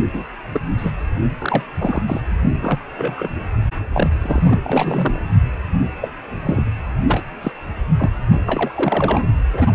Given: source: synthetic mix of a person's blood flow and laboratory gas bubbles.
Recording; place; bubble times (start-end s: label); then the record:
Doppler ultrasound of blood flow; precordium
0.13-0.24 s: bubbles
0.54-0.60 s: bubbles
0.78-0.92 s: bubbles
1.39-1.63 s: bubbles
1.78-2.02 s: bubbles
2.06-2.21 s: bubbles
2.62-2.79 s: bubbles
2.95-3.29 s: bubbles
3.93-4.09 s: bubbles
4.22-4.60 s: bubbles
4.65-5.22 s: bubbles
6.01-6.09 s: bubbles
6.22-6.69 s: bubbles
7.07-7.23 s: bubbles
7.42-7.51 s: bubbles
7.98-8.10 s: bubbles
8.46-8.71 s: bubbles
8.75-9.28 s: bubbles
9.54-9.71 s: bubbles
From the record:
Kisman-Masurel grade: 242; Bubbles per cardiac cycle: several, 3 to 8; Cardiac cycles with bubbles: 100%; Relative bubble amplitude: moderate (0.250 to 0.450); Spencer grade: 3 (all of the cardiac periods contain showers or single bubble signals, but not dominating or overriding the cardiac motion signals); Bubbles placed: anywhere in the cardiac cycle